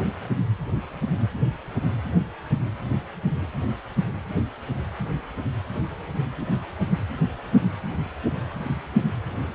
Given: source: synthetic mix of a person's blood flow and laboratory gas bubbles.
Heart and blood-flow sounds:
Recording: Doppler ultrasound of blood flow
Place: precordium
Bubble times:
no bubbles
From the record:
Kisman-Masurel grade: 000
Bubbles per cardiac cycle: 0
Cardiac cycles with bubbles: 0%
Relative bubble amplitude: no bubbles discernible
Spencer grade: 0 (complete lack of bubble signals)

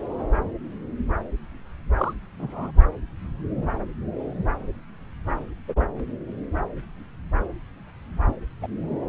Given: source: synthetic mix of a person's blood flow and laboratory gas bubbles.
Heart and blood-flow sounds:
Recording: Doppler ultrasound of blood flow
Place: subclavian vein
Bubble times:
1.98-2.14 s: bubbles
2.39-2.71 s: bubbles
5.68-5.74 s: bubbles
8.61-8.67 s: bubbles
From the record:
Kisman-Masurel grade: 122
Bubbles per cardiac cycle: 1 to 2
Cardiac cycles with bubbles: 10 to 50%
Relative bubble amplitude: moderate (0.250 to 0.450)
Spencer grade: 2 (many but less than half of the cardiac periods contain bubble signals, singularly or in groups)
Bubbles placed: anywhere in the cardiac cycle

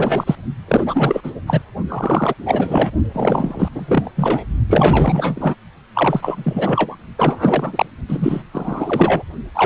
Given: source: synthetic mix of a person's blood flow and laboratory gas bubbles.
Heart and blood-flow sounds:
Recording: Doppler ultrasound of blood flow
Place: precordium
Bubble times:
0.00-0.35 s: bubbles
0.68-1.31 s: bubbles
1.47-1.62 s: bubbles
1.89-2.34 s: bubbles
2.46-2.91 s: bubbles
3.13-3.69 s: bubbles
3.73-4.12 s: bubbles
4.16-4.45 s: bubbles
4.69-5.55 s: bubbles
5.94-6.96 s: bubbles
7.17-7.86 s: bubbles
8.08-8.43 s: bubbles
8.53-9.23 s: bubbles
9.54-9.66 s: bubbles
From the record:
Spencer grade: 4 (maximum detectable bubble signal sounding continuously throughout systole and diastole of every cardiac period, and overriding the amplitude of the normal cardiac signals)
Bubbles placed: only in the low amplitude regions of the cardiac cycle

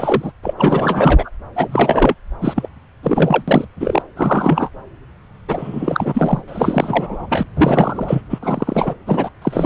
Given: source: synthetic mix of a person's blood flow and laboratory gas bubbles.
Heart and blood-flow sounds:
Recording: Doppler ultrasound of blood flow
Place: subclavian vein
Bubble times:
0.00-0.32 s: bubbles
0.43-0.53 s: bubbles
0.58-1.30 s: bubbles
1.55-2.15 s: bubbles
2.41-2.69 s: bubbles
3.03-3.42 s: bubbles
3.48-3.65 s: bubbles
3.80-4.02 s: bubbles
4.16-4.70 s: bubbles
5.48-6.42 s: bubbles
6.47-7.26 s: bubbles
7.29-7.43 s: bubbles
7.56-8.22 s: bubbles
8.30-8.38 s: bubbles
8.43-8.94 s: bubbles
9.06-9.29 s: bubbles
9.41-9.66 s: bubbles
From the record:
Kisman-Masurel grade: 343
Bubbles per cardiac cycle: rolling drumbeat, 9 or more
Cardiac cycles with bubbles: 100%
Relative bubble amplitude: loud (0.450 to 0.775)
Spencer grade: 3 (all of the cardiac periods contain showers or single bubble signals, but not dominating or overriding the cardiac motion signals)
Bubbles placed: anywhere in the cardiac cycle

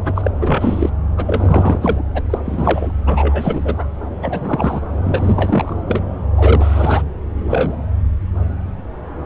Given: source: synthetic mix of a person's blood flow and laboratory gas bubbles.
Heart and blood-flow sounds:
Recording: Doppler ultrasound of blood flow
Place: subclavian vein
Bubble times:
0.05-0.12 s: bubbles
0.15-0.31 s: bubbles
0.41-0.90 s: bubbles
1.17-2.02 s: bubbles
2.13-2.23 s: bubbles
2.30-2.39 s: bubbles
2.45-2.92 s: bubbles
3.05-3.90 s: bubbles
4.22-4.80 s: bubbles
5.04-5.77 s: bubbles
5.88-6.03 s: bubbles
6.36-7.03 s: bubbles
7.45-7.73 s: bubbles
From the record:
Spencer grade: 3 (all of the cardiac periods contain showers or single bubble signals, but not dominating or overriding the cardiac motion signals)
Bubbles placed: anywhere in the cardiac cycle

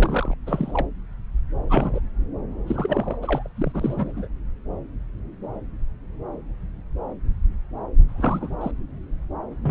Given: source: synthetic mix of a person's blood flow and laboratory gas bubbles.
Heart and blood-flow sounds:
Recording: Doppler ultrasound of blood flow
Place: subclavian vein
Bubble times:
0.00-0.34 s: bubbles
0.46-0.86 s: bubbles
1.70-2.00 s: bubbles
2.67-3.17 s: bubbles
3.22-3.48 s: bubbles
3.56-4.28 s: bubbles
8.09-8.55 s: bubbles
8.61-8.71 s: bubbles
9.63-9.71 s: bubbles
From the record:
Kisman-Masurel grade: 221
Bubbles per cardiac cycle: several, 3 to 8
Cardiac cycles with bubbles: 10 to 50%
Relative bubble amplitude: barely perceptible (0.100 to 0.250)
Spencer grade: 2 (many but less than half of the cardiac periods contain bubble signals, singularly or in groups)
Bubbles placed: anywhere in the cardiac cycle

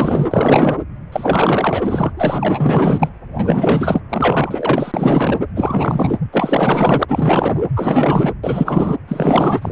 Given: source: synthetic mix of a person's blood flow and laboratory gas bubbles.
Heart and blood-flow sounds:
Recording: Doppler ultrasound of blood flow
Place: precordium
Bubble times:
0.00-0.83 s: bubbles
1.12-2.12 s: bubbles
2.17-3.10 s: bubbles
3.35-4.03 s: bubbles
4.10-5.38 s: bubbles
5.55-6.19 s: bubbles
6.32-7.05 s: bubbles
7.08-7.65 s: bubbles
7.76-8.33 s: bubbles
8.43-8.96 s: bubbles
9.08-9.72 s: bubbles
From the record:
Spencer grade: 4 (maximum detectable bubble signal sounding continuously throughout systole and diastole of every cardiac period, and overriding the amplitude of the normal cardiac signals)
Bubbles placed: anywhere in the cardiac cycle

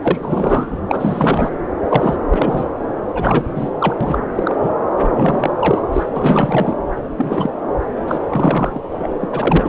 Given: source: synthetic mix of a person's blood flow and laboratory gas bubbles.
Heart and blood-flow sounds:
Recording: Doppler ultrasound of blood flow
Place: subclavian vein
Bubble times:
0.02-0.18 s: bubbles
0.22-0.79 s: bubbles
0.88-1.48 s: bubbles
1.89-2.17 s: bubbles
2.30-2.68 s: bubbles
3.15-3.51 s: bubbles
3.56-3.70 s: bubbles
3.78-3.94 s: bubbles
4.01-4.19 s: bubbles
4.35-4.55 s: bubbles
4.62-4.70 s: bubbles
4.99-5.08 s: bubbles
5.14-5.53 s: bubbles
5.59-5.82 s: bubbles
5.93-6.04 s: bubbles
6.16-6.77 s: bubbles
7.18-7.50 s: bubbles
8.07-8.19 s: bubbles
8.29-8.80 s: bubbles
8.97-9.13 s: bubbles
9.21-9.29 s: bubbles
9.31-9.69 s: bubbles
From the record:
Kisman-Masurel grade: 343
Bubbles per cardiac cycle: rolling drumbeat, 9 or more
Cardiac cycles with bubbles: 100%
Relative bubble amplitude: loud (0.450 to 0.775)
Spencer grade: 3 (all of the cardiac periods contain showers or single bubble signals, but not dominating or overriding the cardiac motion signals)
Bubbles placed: anywhere in the cardiac cycle

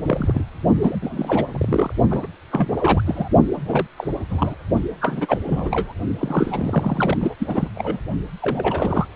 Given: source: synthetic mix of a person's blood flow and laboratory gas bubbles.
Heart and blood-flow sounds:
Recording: Doppler ultrasound of blood flow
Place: precordium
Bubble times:
0.00-0.03 s: bubbles
0.07-0.44 s: bubbles
0.80-0.98 s: bubbles
1.01-1.46 s: bubbles
1.50-1.93 s: bubbles
2.10-2.26 s: bubbles
2.51-3.28 s: bubbles
3.54-3.87 s: bubbles
3.97-4.07 s: bubbles
4.29-4.55 s: bubbles
5.00-5.38 s: bubbles
5.46-5.93 s: bubbles
6.18-7.17 s: bubbles
7.21-7.34 s: bubbles
7.39-7.69 s: bubbles
7.75-7.99 s: bubbles
8.40-9.07 s: bubbles
From the record:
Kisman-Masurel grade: 342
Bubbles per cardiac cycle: rolling drumbeat, 9 or more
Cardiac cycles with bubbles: 100%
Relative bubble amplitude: moderate (0.250 to 0.450)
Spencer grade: 3 (all of the cardiac periods contain showers or single bubble signals, but not dominating or overriding the cardiac motion signals)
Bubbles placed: only in the low amplitude regions of the cardiac cycle

